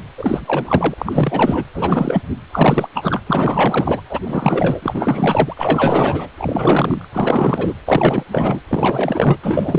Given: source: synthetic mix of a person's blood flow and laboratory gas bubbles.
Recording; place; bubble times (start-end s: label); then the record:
Doppler ultrasound of blood flow; precordium
0.00-0.04 s: bubbles
0.17-0.94 s: bubbles
0.98-1.64 s: bubbles
1.74-2.22 s: bubbles
2.52-2.88 s: bubbles
2.94-3.21 s: bubbles
3.27-4.01 s: bubbles
4.09-4.20 s: bubbles
4.24-5.54 s: bubbles
5.57-6.29 s: bubbles
6.37-7.08 s: bubbles
7.12-7.74 s: bubbles
7.86-8.23 s: bubbles
8.31-8.61 s: bubbles
8.68-9.37 s: bubbles
9.43-9.79 s: bubbles
From the record:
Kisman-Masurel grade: 444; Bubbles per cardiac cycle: continuous sound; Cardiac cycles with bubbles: 100%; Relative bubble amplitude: maximal (0.775 to 0.999); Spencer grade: 4 (maximum detectable bubble signal sounding continuously throughout systole and diastole of every cardiac period, and overriding the amplitude of the normal cardiac signals); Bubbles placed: anywhere in the cardiac cycle